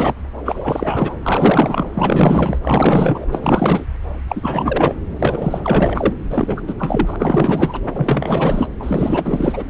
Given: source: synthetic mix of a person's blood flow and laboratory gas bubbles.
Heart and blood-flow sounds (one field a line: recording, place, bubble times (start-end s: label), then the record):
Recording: Doppler ultrasound of blood flow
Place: subclavian vein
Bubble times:
0.00-0.14 s: bubbles
0.44-1.16 s: bubbles
1.23-1.90 s: bubbles
1.94-2.59 s: bubbles
2.63-3.25 s: bubbles
3.31-3.86 s: bubbles
4.28-4.96 s: bubbles
5.19-6.13 s: bubbles
6.29-6.61 s: bubbles
6.67-6.74 s: bubbles
6.79-7.16 s: bubbles
7.19-7.81 s: bubbles
7.93-8.69 s: bubbles
8.79-9.63 s: bubbles
From the record:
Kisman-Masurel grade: 444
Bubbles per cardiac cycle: continuous sound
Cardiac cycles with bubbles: 100%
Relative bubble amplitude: maximal (0.775 to 0.999)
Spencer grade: 4 (maximum detectable bubble signal sounding continuously throughout systole and diastole of every cardiac period, and overriding the amplitude of the normal cardiac signals)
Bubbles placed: anywhere in the cardiac cycle